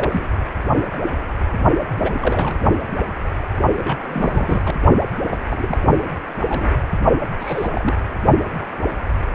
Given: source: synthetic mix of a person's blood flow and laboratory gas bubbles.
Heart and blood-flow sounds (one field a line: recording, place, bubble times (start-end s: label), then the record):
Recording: Doppler ultrasound of blood flow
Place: precordium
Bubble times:
0.00-0.26 s: bubbles
1.99-2.56 s: bubbles
3.76-4.62 s: bubbles
4.65-4.74 s: bubbles
5.30-5.38 s: bubbles
5.49-5.77 s: bubbles
5.98-6.02 s: bubbles
6.48-6.71 s: bubbles
7.39-7.93 s: bubbles
From the record:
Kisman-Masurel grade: 221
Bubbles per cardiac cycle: several, 3 to 8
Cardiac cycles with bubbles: 10 to 50%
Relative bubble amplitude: barely perceptible (0.100 to 0.250)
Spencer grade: 2 (many but less than half of the cardiac periods contain bubble signals, singularly or in groups)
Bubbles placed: only in the low amplitude regions of the cardiac cycle